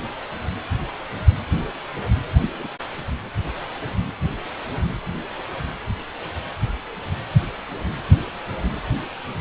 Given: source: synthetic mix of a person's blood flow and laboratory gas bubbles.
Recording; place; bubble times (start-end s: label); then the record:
Doppler ultrasound of blood flow; precordium
2.57-2.68 s: bubbles
From the record:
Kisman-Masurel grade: 111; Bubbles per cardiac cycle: 1 to 2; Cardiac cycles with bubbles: 1 to 10%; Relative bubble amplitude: barely perceptible (0.100 to 0.250); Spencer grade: 1 (occasional bubble signal discernible with the cardiac motion signal, with majority of cardiac periods free of bubbles); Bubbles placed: anywhere in the cardiac cycle